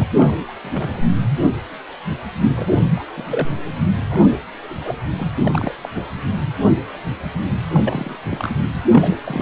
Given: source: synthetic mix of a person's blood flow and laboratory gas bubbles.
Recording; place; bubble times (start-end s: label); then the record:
Doppler ultrasound of blood flow; precordium
0.00-0.04 s: bubbles
0.17-0.32 s: bubbles
0.48-0.53 s: bubbles
0.62-1.10 s: bubbles
2.54-2.79 s: bubbles
2.96-3.03 s: bubbles
3.17-3.49 s: bubbles
4.10-4.21 s: bubbles
4.70-4.99 s: bubbles
5.17-5.28 s: bubbles
5.44-5.73 s: bubbles
5.83-5.89 s: bubbles
5.96-6.07 s: bubbles
7.68-8.16 s: bubbles
8.23-8.59 s: bubbles
8.92-9.16 s: bubbles
9.23-9.42 s: bubbles
From the record:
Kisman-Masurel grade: 232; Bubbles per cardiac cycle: several, 3 to 8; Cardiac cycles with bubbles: 50 to 99%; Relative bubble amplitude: moderate (0.250 to 0.450); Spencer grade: 3 (all of the cardiac periods contain showers or single bubble signals, but not dominating or overriding the cardiac motion signals); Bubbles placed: anywhere in the cardiac cycle